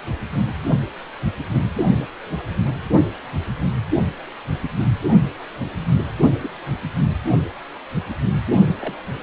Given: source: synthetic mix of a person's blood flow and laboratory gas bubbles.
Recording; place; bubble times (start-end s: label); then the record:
Doppler ultrasound of blood flow; precordium
6.39-6.54 s: bubbles
8.79-8.94 s: bubbles
From the record:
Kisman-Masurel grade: 121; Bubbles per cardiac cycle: 1 to 2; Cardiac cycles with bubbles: 10 to 50%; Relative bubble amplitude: barely perceptible (0.100 to 0.250); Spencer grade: 2 (many but less than half of the cardiac periods contain bubble signals, singularly or in groups); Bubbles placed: only in the low amplitude regions of the cardiac cycle